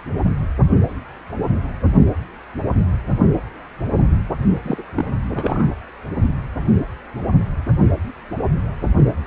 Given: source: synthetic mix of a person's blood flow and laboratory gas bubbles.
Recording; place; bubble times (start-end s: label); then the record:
Doppler ultrasound of blood flow; precordium
4.62-4.83 s: bubbles
4.95-5.05 s: bubbles
5.31-5.74 s: bubbles
From the record:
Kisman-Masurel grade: 212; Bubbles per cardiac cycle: several, 3 to 8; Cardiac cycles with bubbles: 1 to 10%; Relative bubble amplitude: moderate (0.250 to 0.450); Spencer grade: 1 (occasional bubble signal discernible with the cardiac motion signal, with majority of cardiac periods free of bubbles); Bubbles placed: only in the low amplitude regions of the cardiac cycle